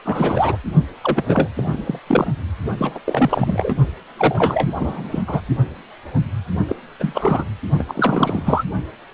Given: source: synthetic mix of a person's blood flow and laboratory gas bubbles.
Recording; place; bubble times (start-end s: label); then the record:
Doppler ultrasound of blood flow; precordium
0.04-0.57 s: bubbles
1.01-1.24 s: bubbles
1.27-1.48 s: bubbles
1.55-1.99 s: bubbles
2.06-2.27 s: bubbles
2.77-2.99 s: bubbles
3.04-3.75 s: bubbles
4.17-5.23 s: bubbles
5.27-5.41 s: bubbles
6.68-6.75 s: bubbles
6.99-7.45 s: bubbles
7.79-7.83 s: bubbles
7.88-8.63 s: bubbles
From the record:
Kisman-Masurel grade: 333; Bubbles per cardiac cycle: rolling drumbeat, 9 or more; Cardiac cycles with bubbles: 50 to 99%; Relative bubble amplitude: loud (0.450 to 0.775); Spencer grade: 3 (all of the cardiac periods contain showers or single bubble signals, but not dominating or overriding the cardiac motion signals); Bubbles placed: only in the low amplitude regions of the cardiac cycle